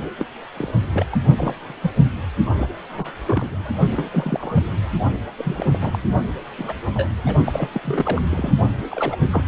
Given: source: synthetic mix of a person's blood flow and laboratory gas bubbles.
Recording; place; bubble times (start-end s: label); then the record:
Doppler ultrasound of blood flow; precordium
0.18-0.25 s: bubbles
0.56-0.74 s: bubbles
0.93-1.06 s: bubbles
1.12-1.17 s: bubbles
1.36-1.74 s: bubbles
1.82-1.91 s: bubbles
2.46-2.51 s: bubbles
2.57-2.69 s: bubbles
2.90-3.12 s: bubbles
3.26-3.73 s: bubbles
3.91-4.09 s: bubbles
4.12-4.63 s: bubbles
5.38-5.66 s: bubbles
5.72-5.99 s: bubbles
6.58-6.73 s: bubbles
6.95-7.08 s: bubbles
7.26-7.35 s: bubbles
7.46-7.70 s: bubbles
7.73-7.80 s: bubbles
7.84-8.21 s: bubbles
8.30-8.52 s: bubbles
8.91-9.16 s: bubbles
9.30-9.44 s: bubbles
From the record:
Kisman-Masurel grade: 242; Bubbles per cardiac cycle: several, 3 to 8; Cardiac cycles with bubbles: 100%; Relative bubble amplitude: moderate (0.250 to 0.450); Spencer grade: 3 (all of the cardiac periods contain showers or single bubble signals, but not dominating or overriding the cardiac motion signals); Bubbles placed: only in the low amplitude regions of the cardiac cycle